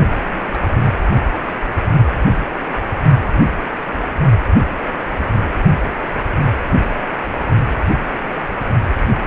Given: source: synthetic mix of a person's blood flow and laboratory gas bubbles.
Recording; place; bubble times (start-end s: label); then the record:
Doppler ultrasound of blood flow; precordium
0.25-0.47 s: bubbles
0.51-0.93 s: bubbles
From the record:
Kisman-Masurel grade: 211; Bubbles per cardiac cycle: several, 3 to 8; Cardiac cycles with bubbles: 1 to 10%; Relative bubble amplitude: barely perceptible (0.100 to 0.250); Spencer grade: 1 (occasional bubble signal discernible with the cardiac motion signal, with majority of cardiac periods free of bubbles); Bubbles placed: only in the low amplitude regions of the cardiac cycle